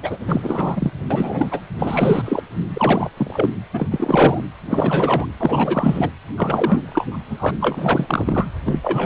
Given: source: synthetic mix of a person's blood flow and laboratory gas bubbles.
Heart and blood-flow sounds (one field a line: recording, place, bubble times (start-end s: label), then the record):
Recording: Doppler ultrasound of blood flow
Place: precordium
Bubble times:
0.02-0.18 s: bubbles
0.27-0.92 s: bubbles
1.10-1.61 s: bubbles
1.78-2.42 s: bubbles
2.74-3.10 s: bubbles
3.17-3.50 s: bubbles
3.73-3.87 s: bubbles
3.91-4.44 s: bubbles
4.70-5.25 s: bubbles
5.37-6.09 s: bubbles
6.37-7.18 s: bubbles
7.25-7.51 s: bubbles
7.61-8.47 s: bubbles
8.65-8.79 s: bubbles
8.82-9.06 s: bubbles
From the record:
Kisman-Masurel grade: 343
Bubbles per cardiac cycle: rolling drumbeat, 9 or more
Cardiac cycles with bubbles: 100%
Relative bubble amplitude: loud (0.450 to 0.775)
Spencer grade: 3 (all of the cardiac periods contain showers or single bubble signals, but not dominating or overriding the cardiac motion signals)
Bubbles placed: anywhere in the cardiac cycle